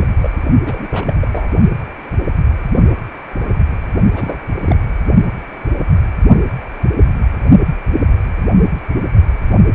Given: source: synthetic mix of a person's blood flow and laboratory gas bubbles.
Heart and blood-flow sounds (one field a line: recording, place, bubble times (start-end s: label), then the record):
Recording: Doppler ultrasound of blood flow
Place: precordium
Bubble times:
0.00-0.06 s: bubbles
0.21-0.30 s: bubbles
0.35-0.41 s: bubbles
0.64-0.88 s: bubbles
0.91-1.05 s: bubbles
1.07-1.13 s: bubbles
1.19-1.47 s: bubbles
4.13-4.38 s: bubbles
4.64-4.76 s: bubbles
From the record:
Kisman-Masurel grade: 221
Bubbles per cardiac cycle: several, 3 to 8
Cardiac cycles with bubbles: 10 to 50%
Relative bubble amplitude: barely perceptible (0.100 to 0.250)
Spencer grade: 2 (many but less than half of the cardiac periods contain bubble signals, singularly or in groups)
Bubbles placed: only in the low amplitude regions of the cardiac cycle